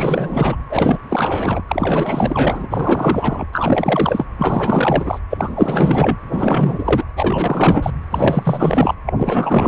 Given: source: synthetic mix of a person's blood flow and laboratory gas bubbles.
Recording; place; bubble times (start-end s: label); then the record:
Doppler ultrasound of blood flow; precordium
0.00-0.57 s: bubbles
0.69-0.98 s: bubbles
1.08-1.62 s: bubbles
1.67-2.67 s: bubbles
2.70-3.46 s: bubbles
3.52-4.25 s: bubbles
4.38-5.20 s: bubbles
5.29-6.17 s: bubbles
6.30-7.04 s: bubbles
7.16-7.91 s: bubbles
8.11-8.95 s: bubbles
9.05-9.13 s: bubbles
9.16-9.68 s: bubbles
From the record:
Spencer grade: 4 (maximum detectable bubble signal sounding continuously throughout systole and diastole of every cardiac period, and overriding the amplitude of the normal cardiac signals); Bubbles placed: anywhere in the cardiac cycle